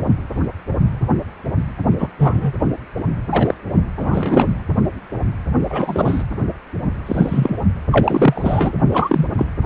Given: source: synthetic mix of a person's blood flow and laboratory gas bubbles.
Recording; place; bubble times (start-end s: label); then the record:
Doppler ultrasound of blood flow; precordium
1.99-2.10 s: bubbles
2.18-2.53 s: bubbles
3.31-3.54 s: bubbles
3.98-4.60 s: bubbles
5.70-6.23 s: bubbles
7.06-7.58 s: bubbles
7.91-8.78 s: bubbles
8.91-9.29 s: bubbles
9.37-9.47 s: bubbles
From the record:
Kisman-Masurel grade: 233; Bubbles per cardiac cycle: several, 3 to 8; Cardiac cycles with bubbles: 50 to 99%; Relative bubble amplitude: loud (0.450 to 0.775); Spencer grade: 3 (all of the cardiac periods contain showers or single bubble signals, but not dominating or overriding the cardiac motion signals); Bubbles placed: anywhere in the cardiac cycle